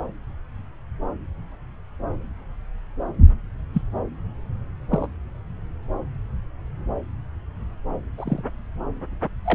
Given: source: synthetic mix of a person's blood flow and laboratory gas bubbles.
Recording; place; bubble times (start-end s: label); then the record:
Doppler ultrasound of blood flow; subclavian vein
3.74-3.82 s: bubbles
4.91-5.08 s: bubbles
8.18-8.42 s: bubbles
9.45-9.55 s: bubbles
From the record:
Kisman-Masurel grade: 122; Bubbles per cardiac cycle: 1 to 2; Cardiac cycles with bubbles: 10 to 50%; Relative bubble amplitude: moderate (0.250 to 0.450); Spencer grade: 2 (many but less than half of the cardiac periods contain bubble signals, singularly or in groups); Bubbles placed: anywhere in the cardiac cycle